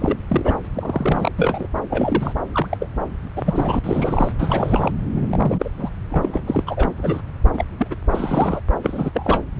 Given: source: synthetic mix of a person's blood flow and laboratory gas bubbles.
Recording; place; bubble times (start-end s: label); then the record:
Doppler ultrasound of blood flow; subclavian vein
0.00-0.18 s: bubbles
0.29-0.59 s: bubbles
0.65-0.68 s: bubbles
0.74-1.31 s: bubbles
1.38-1.68 s: bubbles
1.90-2.33 s: bubbles
2.52-2.67 s: bubbles
2.69-2.77 s: bubbles
2.80-2.87 s: bubbles
3.35-3.79 s: bubbles
3.84-4.31 s: bubbles
4.38-4.91 s: bubbles
5.16-5.27 s: bubbles
5.30-5.69 s: bubbles
5.78-5.89 s: bubbles
6.10-6.42 s: bubbles
6.46-6.63 s: bubbles
6.67-7.21 s: bubbles
7.52-7.64 s: bubbles
7.79-7.87 s: bubbles
7.90-7.95 s: bubbles
8.11-8.61 s: bubbles
8.82-9.10 s: bubbles
9.13-9.42 s: bubbles
From the record:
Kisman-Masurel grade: 242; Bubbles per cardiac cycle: several, 3 to 8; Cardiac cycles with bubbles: 100%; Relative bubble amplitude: moderate (0.250 to 0.450); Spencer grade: 3 (all of the cardiac periods contain showers or single bubble signals, but not dominating or overriding the cardiac motion signals); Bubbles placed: anywhere in the cardiac cycle